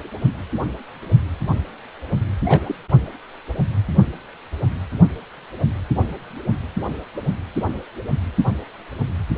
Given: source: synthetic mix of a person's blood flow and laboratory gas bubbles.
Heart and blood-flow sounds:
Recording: Doppler ultrasound of blood flow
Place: precordium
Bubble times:
2.42-2.75 s: bubbles
2.91-3.07 s: bubbles
From the record:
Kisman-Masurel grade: 211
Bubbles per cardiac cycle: several, 3 to 8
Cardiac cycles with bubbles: 1 to 10%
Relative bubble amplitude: barely perceptible (0.100 to 0.250)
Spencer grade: 1 (occasional bubble signal discernible with the cardiac motion signal, with majority of cardiac periods free of bubbles)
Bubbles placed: anywhere in the cardiac cycle

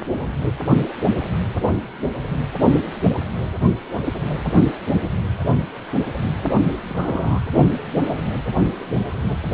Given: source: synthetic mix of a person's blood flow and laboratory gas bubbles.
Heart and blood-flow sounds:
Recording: Doppler ultrasound of blood flow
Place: precordium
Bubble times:
6.89-7.41 s: bubbles
From the record:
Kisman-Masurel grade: 111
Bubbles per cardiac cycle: 1 to 2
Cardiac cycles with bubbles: 1 to 10%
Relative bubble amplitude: barely perceptible (0.100 to 0.250)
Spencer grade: 1 (occasional bubble signal discernible with the cardiac motion signal, with majority of cardiac periods free of bubbles)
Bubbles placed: anywhere in the cardiac cycle

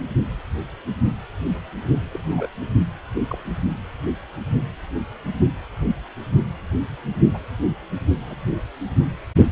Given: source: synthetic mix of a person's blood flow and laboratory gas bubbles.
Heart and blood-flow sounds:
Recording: Doppler ultrasound of blood flow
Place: precordium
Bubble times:
2.13-2.48 s: bubbles
3.15-3.21 s: bubbles
3.27-3.38 s: bubbles
7.33-7.38 s: bubbles
8.25-8.36 s: bubbles
From the record:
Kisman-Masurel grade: 121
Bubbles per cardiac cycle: 1 to 2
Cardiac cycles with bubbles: 10 to 50%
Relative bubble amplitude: barely perceptible (0.100 to 0.250)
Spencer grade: 2 (many but less than half of the cardiac periods contain bubble signals, singularly or in groups)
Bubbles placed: only in the low amplitude regions of the cardiac cycle

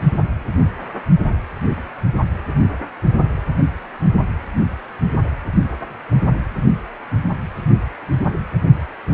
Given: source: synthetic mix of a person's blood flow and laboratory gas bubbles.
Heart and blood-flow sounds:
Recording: Doppler ultrasound of blood flow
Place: precordium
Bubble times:
no bubbles
From the record:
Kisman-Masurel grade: 000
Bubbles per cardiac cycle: 0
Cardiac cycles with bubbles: 0%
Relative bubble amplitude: no bubbles discernible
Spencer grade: 0 (complete lack of bubble signals)

